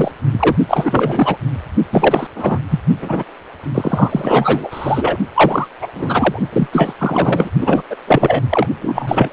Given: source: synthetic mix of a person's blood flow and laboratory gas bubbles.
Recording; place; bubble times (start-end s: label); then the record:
Doppler ultrasound of blood flow; precordium
0.00-0.11 s: bubbles
0.33-0.56 s: bubbles
0.68-1.36 s: bubbles
1.92-2.27 s: bubbles
2.35-2.58 s: bubbles
2.70-2.81 s: bubbles
3.02-3.23 s: bubbles
3.74-5.17 s: bubbles
5.35-5.67 s: bubbles
5.81-5.88 s: bubbles
5.95-6.39 s: bubbles
6.52-6.67 s: bubbles
6.72-6.93 s: bubbles
6.99-7.50 s: bubbles
7.61-7.83 s: bubbles
7.90-7.96 s: bubbles
8.07-8.45 s: bubbles
8.50-8.67 s: bubbles
8.81-9.29 s: bubbles
From the record:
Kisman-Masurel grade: 333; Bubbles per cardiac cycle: rolling drumbeat, 9 or more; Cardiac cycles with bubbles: 50 to 99%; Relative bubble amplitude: loud (0.450 to 0.775); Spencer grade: 3 (all of the cardiac periods contain showers or single bubble signals, but not dominating or overriding the cardiac motion signals); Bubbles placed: only in the low amplitude regions of the cardiac cycle